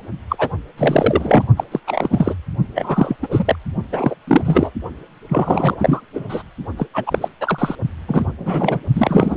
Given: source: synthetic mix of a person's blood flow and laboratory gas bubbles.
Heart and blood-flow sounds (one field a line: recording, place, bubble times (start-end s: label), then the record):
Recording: Doppler ultrasound of blood flow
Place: precordium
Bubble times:
0.29-0.48 s: bubbles
0.78-1.46 s: bubbles
1.57-1.64 s: bubbles
1.71-1.79 s: bubbles
1.87-2.34 s: bubbles
2.75-3.17 s: bubbles
3.22-3.55 s: bubbles
3.92-4.15 s: bubbles
4.27-4.42 s: bubbles
4.45-4.71 s: bubbles
5.29-5.76 s: bubbles
5.78-6.01 s: bubbles
6.14-6.43 s: bubbles
6.77-6.87 s: bubbles
6.94-7.19 s: bubbles
7.22-7.29 s: bubbles
7.40-7.76 s: bubbles
8.08-8.26 s: bubbles
8.38-8.80 s: bubbles
8.95-9.37 s: bubbles
From the record:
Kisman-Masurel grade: 343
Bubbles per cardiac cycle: rolling drumbeat, 9 or more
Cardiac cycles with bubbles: 100%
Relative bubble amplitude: loud (0.450 to 0.775)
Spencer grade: 3 (all of the cardiac periods contain showers or single bubble signals, but not dominating or overriding the cardiac motion signals)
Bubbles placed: only in the low amplitude regions of the cardiac cycle